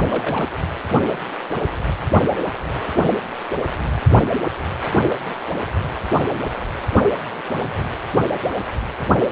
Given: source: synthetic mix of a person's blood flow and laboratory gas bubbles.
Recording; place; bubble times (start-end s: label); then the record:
Doppler ultrasound of blood flow; precordium
0.11-0.53 s: bubbles
From the record:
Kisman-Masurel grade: 111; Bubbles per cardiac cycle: 1 to 2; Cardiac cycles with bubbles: 1 to 10%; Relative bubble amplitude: barely perceptible (0.100 to 0.250); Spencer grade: 1 (occasional bubble signal discernible with the cardiac motion signal, with majority of cardiac periods free of bubbles); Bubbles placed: anywhere in the cardiac cycle